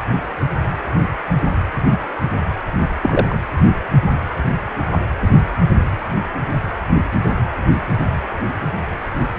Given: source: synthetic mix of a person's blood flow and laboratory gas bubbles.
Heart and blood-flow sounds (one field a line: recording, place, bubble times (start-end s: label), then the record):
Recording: Doppler ultrasound of blood flow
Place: precordium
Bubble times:
3.01-3.38 s: bubbles
From the record:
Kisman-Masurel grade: 112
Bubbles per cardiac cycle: 1 to 2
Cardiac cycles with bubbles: 1 to 10%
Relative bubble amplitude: moderate (0.250 to 0.450)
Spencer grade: 1 (occasional bubble signal discernible with the cardiac motion signal, with majority of cardiac periods free of bubbles)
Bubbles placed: anywhere in the cardiac cycle